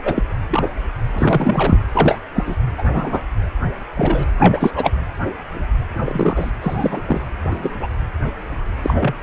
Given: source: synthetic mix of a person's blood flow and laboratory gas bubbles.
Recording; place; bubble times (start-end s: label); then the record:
Doppler ultrasound of blood flow; precordium
0.04-0.23 s: bubbles
0.50-0.69 s: bubbles
1.12-1.79 s: bubbles
1.94-2.19 s: bubbles
2.34-2.56 s: bubbles
2.77-2.82 s: bubbles
2.92-3.21 s: bubbles
3.96-4.25 s: bubbles
4.39-4.71 s: bubbles
4.76-4.92 s: bubbles
5.98-6.51 s: bubbles
6.61-7.02 s: bubbles
7.06-7.21 s: bubbles
7.44-7.88 s: bubbles
8.81-9.15 s: bubbles
From the record:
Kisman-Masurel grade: 233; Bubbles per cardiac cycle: several, 3 to 8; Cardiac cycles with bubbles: 50 to 99%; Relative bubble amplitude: loud (0.450 to 0.775); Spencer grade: 3 (all of the cardiac periods contain showers or single bubble signals, but not dominating or overriding the cardiac motion signals); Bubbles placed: anywhere in the cardiac cycle